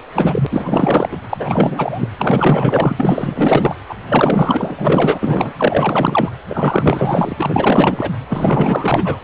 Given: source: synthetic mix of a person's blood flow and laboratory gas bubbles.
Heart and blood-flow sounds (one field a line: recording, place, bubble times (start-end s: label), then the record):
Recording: Doppler ultrasound of blood flow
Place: precordium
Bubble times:
0.14-0.47 s: bubbles
0.51-1.18 s: bubbles
1.30-2.07 s: bubbles
2.19-3.75 s: bubbles
3.88-3.95 s: bubbles
4.09-4.75 s: bubbles
4.79-5.53 s: bubbles
5.58-6.29 s: bubbles
6.49-7.34 s: bubbles
7.37-8.11 s: bubbles
8.29-9.19 s: bubbles
From the record:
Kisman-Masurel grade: 444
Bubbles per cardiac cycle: continuous sound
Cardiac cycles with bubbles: 100%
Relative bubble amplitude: maximal (0.775 to 0.999)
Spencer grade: 4 (maximum detectable bubble signal sounding continuously throughout systole and diastole of every cardiac period, and overriding the amplitude of the normal cardiac signals)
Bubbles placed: anywhere in the cardiac cycle